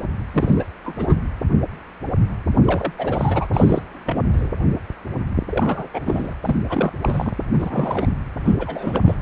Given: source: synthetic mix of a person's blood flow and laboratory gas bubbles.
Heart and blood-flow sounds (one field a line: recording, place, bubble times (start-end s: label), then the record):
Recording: Doppler ultrasound of blood flow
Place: precordium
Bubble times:
0.34-0.65 s: bubbles
0.84-0.96 s: bubbles
0.99-1.16 s: bubbles
2.66-2.92 s: bubbles
2.97-3.47 s: bubbles
3.53-3.82 s: bubbles
4.06-4.23 s: bubbles
4.33-4.50 s: bubbles
5.50-5.88 s: bubbles
5.94-6.35 s: bubbles
6.42-6.56 s: bubbles
6.70-6.91 s: bubbles
7.01-7.32 s: bubbles
7.52-8.06 s: bubbles
8.44-8.55 s: bubbles
8.58-9.14 s: bubbles
From the record:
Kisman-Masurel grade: 332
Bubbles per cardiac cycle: rolling drumbeat, 9 or more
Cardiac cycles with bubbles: 50 to 99%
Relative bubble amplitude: moderate (0.250 to 0.450)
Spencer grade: 3 (all of the cardiac periods contain showers or single bubble signals, but not dominating or overriding the cardiac motion signals)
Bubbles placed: anywhere in the cardiac cycle